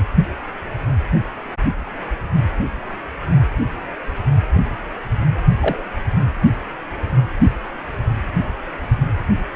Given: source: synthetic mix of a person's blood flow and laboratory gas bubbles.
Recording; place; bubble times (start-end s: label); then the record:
Doppler ultrasound of blood flow; precordium
5.60-5.83 s: bubbles
From the record:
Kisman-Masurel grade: 112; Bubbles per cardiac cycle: 1 to 2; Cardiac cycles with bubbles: 1 to 10%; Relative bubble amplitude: moderate (0.250 to 0.450); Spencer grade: 1 (occasional bubble signal discernible with the cardiac motion signal, with majority of cardiac periods free of bubbles); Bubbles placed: only in the low amplitude regions of the cardiac cycle